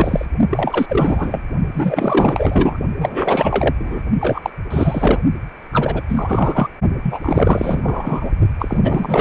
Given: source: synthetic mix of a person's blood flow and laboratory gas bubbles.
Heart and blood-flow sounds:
Doppler ultrasound of blood flow; precordium
0.00-0.26 s: bubbles
0.51-0.86 s: bubbles
0.89-1.42 s: bubbles
1.74-2.79 s: bubbles
2.97-3.75 s: bubbles
3.78-4.02 s: bubbles
4.21-4.50 s: bubbles
4.70-5.20 s: bubbles
5.72-6.01 s: bubbles
6.07-6.68 s: bubbles
7.01-8.31 s: bubbles
8.59-9.21 s: bubbles
From the record:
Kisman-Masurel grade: 444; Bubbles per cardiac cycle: continuous sound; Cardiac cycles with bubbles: 100%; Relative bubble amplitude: maximal (0.775 to 0.999); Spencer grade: 4 (maximum detectable bubble signal sounding continuously throughout systole and diastole of every cardiac period, and overriding the amplitude of the normal cardiac signals); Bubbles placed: only in the low amplitude regions of the cardiac cycle

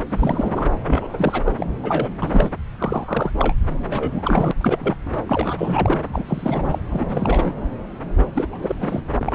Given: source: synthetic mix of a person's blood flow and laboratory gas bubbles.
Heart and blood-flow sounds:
Doppler ultrasound of blood flow; subclavian vein
0.09-0.68 s: bubbles
0.86-1.54 s: bubbles
1.57-1.66 s: bubbles
1.83-2.10 s: bubbles
2.20-2.51 s: bubbles
2.75-3.31 s: bubbles
3.38-3.54 s: bubbles
3.90-4.51 s: bubbles
4.60-4.96 s: bubbles
5.05-5.14 s: bubbles
5.26-5.99 s: bubbles
6.12-6.79 s: bubbles
6.90-7.54 s: bubbles
8.34-8.75 s: bubbles
8.80-9.00 s: bubbles
9.19-9.35 s: bubbles
From the record:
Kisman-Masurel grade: 332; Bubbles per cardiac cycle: rolling drumbeat, 9 or more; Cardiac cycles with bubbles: 50 to 99%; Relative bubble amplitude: moderate (0.250 to 0.450); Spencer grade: 3 (all of the cardiac periods contain showers or single bubble signals, but not dominating or overriding the cardiac motion signals); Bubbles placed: anywhere in the cardiac cycle

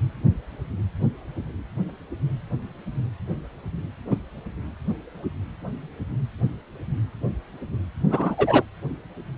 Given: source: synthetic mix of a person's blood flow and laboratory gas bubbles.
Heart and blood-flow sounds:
Doppler ultrasound of blood flow; precordium
4.10-4.16 s: bubbles
8.09-8.64 s: bubbles
From the record:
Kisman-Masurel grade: 123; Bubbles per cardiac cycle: 1 to 2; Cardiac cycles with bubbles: 10 to 50%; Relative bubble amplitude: loud (0.450 to 0.775); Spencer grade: 2 (many but less than half of the cardiac periods contain bubble signals, singularly or in groups); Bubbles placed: anywhere in the cardiac cycle

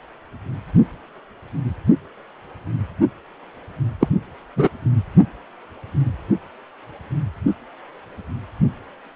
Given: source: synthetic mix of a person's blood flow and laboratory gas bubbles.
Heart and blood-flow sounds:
Doppler ultrasound of blood flow; precordium
4.00-4.07 s: bubbles
4.56-4.68 s: bubbles
From the record:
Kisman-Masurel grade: 113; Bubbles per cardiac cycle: 1 to 2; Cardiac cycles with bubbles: 1 to 10%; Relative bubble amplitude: loud (0.450 to 0.775); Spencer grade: 1 (occasional bubble signal discernible with the cardiac motion signal, with majority of cardiac periods free of bubbles); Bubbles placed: only in the low amplitude regions of the cardiac cycle

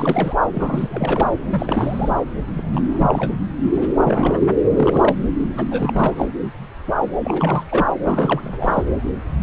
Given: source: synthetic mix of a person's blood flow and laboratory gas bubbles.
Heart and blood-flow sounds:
Doppler ultrasound of blood flow; subclavian vein
0.00-0.35 s: bubbles
0.53-1.31 s: bubbles
1.51-2.10 s: bubbles
2.55-3.33 s: bubbles
3.73-3.88 s: bubbles
3.98-4.47 s: bubbles
4.76-5.15 s: bubbles
5.19-5.24 s: bubbles
5.57-6.27 s: bubbles
7.23-7.63 s: bubbles
7.69-7.86 s: bubbles
8.04-8.83 s: bubbles
From the record:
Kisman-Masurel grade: 332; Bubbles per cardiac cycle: rolling drumbeat, 9 or more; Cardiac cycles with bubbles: 50 to 99%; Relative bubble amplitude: moderate (0.250 to 0.450); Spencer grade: 3 (all of the cardiac periods contain showers or single bubble signals, but not dominating or overriding the cardiac motion signals); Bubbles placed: anywhere in the cardiac cycle

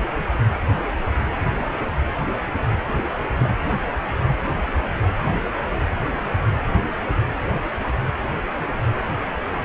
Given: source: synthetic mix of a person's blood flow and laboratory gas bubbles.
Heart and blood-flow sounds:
Doppler ultrasound of blood flow; precordium
3.39-3.57 s: bubbles
From the record:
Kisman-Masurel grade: 111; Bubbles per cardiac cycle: 1 to 2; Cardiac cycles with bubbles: 1 to 10%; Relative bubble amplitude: barely perceptible (0.100 to 0.250); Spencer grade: 1 (occasional bubble signal discernible with the cardiac motion signal, with majority of cardiac periods free of bubbles); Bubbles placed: anywhere in the cardiac cycle

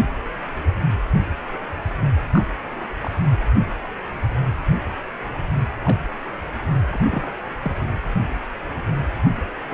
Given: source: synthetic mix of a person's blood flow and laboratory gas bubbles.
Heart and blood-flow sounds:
Doppler ultrasound of blood flow; precordium
2.33-2.50 s: bubbles
3.02-3.10 s: bubbles
5.84-5.97 s: bubbles
6.91-7.30 s: bubbles
7.65-7.72 s: bubbles
9.71-9.74 s: bubbles
From the record:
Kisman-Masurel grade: 121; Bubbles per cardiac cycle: 1 to 2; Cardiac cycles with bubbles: 10 to 50%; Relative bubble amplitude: barely perceptible (0.100 to 0.250); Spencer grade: 2 (many but less than half of the cardiac periods contain bubble signals, singularly or in groups); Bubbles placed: anywhere in the cardiac cycle

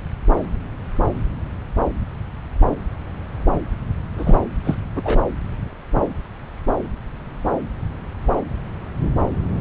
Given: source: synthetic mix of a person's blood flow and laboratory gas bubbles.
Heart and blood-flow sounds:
Doppler ultrasound of blood flow; subclavian vein
4.17-4.35 s: bubbles
4.64-4.75 s: bubbles
4.95-5.24 s: bubbles
From the record:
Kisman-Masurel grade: 212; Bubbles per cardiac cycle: several, 3 to 8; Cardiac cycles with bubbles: 1 to 10%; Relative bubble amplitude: moderate (0.250 to 0.450); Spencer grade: 1 (occasional bubble signal discernible with the cardiac motion signal, with majority of cardiac periods free of bubbles); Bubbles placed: anywhere in the cardiac cycle

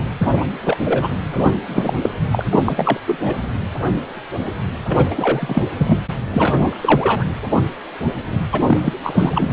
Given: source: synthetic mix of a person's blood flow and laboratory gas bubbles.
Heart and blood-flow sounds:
Doppler ultrasound of blood flow; precordium
0.00-0.07 s: bubbles
0.18-0.28 s: bubbles
0.36-0.45 s: bubbles
0.65-1.19 s: bubbles
1.33-1.52 s: bubbles
1.65-1.94 s: bubbles
2.02-2.10 s: bubbles
2.32-2.46 s: bubbles
2.50-2.98 s: bubbles
3.07-3.18 s: bubbles
3.25-3.35 s: bubbles
4.88-5.07 s: bubbles
5.10-5.62 s: bubbles
5.78-5.98 s: bubbles
6.30-6.79 s: bubbles
6.81-7.25 s: bubbles
8.51-8.62 s: bubbles
8.67-8.93 s: bubbles
9.03-9.49 s: bubbles
From the record:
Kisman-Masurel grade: 333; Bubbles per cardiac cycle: rolling drumbeat, 9 or more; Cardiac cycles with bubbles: 50 to 99%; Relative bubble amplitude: loud (0.450 to 0.775); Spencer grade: 3 (all of the cardiac periods contain showers or single bubble signals, but not dominating or overriding the cardiac motion signals); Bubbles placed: anywhere in the cardiac cycle

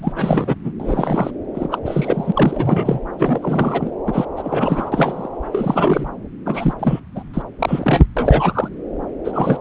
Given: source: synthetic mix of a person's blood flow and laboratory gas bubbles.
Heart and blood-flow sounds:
Doppler ultrasound of blood flow; subclavian vein
0.01-0.12 s: bubbles
0.15-0.55 s: bubbles
0.64-0.71 s: bubbles
0.80-1.30 s: bubbles
1.54-1.69 s: bubbles
1.71-1.79 s: bubbles
1.85-3.00 s: bubbles
3.19-3.91 s: bubbles
4.07-4.25 s: bubbles
4.37-5.28 s: bubbles
5.52-6.09 s: bubbles
6.46-6.74 s: bubbles
6.79-7.00 s: bubbles
7.14-7.23 s: bubbles
7.33-7.42 s: bubbles
7.59-8.06 s: bubbles
8.16-8.69 s: bubbles
9.24-9.60 s: bubbles
From the record:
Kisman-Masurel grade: 343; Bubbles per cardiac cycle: rolling drumbeat, 9 or more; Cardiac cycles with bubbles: 100%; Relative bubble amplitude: loud (0.450 to 0.775); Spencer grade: 3 (all of the cardiac periods contain showers or single bubble signals, but not dominating or overriding the cardiac motion signals); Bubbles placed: anywhere in the cardiac cycle

